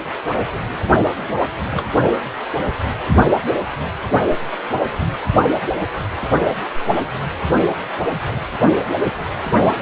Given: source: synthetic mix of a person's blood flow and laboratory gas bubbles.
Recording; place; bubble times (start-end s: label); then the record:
Doppler ultrasound of blood flow; precordium
1.70-1.85 s: bubbles
From the record:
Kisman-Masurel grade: 112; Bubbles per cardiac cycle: 1 to 2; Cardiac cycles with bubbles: 1 to 10%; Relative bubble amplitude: moderate (0.250 to 0.450); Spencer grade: 1 (occasional bubble signal discernible with the cardiac motion signal, with majority of cardiac periods free of bubbles); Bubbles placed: only in the low amplitude regions of the cardiac cycle